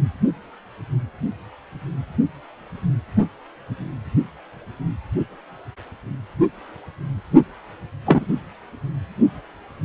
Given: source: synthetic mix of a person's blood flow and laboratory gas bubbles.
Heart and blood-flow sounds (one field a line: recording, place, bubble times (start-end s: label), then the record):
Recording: Doppler ultrasound of blood flow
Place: precordium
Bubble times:
8.06-8.26 s: bubbles
From the record:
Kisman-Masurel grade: 113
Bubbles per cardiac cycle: 1 to 2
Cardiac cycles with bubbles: 1 to 10%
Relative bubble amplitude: loud (0.450 to 0.775)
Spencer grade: 1 (occasional bubble signal discernible with the cardiac motion signal, with majority of cardiac periods free of bubbles)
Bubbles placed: only in the low amplitude regions of the cardiac cycle